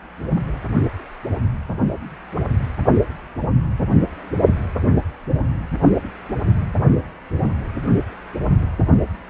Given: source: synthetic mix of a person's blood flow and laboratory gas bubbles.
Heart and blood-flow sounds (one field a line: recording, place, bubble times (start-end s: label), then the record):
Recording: Doppler ultrasound of blood flow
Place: precordium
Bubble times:
no bubbles
From the record:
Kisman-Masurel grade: 000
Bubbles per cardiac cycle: 0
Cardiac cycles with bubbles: 0%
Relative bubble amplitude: no bubbles discernible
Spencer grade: 0 (complete lack of bubble signals)